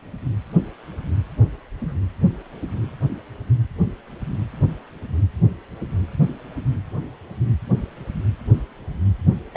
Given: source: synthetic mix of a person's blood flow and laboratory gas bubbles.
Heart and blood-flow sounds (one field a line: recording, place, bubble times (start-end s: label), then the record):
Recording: Doppler ultrasound of blood flow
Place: precordium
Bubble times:
1.80-1.95 s: bubbles
9.54-9.57 s: bubbles
From the record:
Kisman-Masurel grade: 121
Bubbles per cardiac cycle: 1 to 2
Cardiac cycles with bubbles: 10 to 50%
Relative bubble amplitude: barely perceptible (0.100 to 0.250)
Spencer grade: 2 (many but less than half of the cardiac periods contain bubble signals, singularly or in groups)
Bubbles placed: anywhere in the cardiac cycle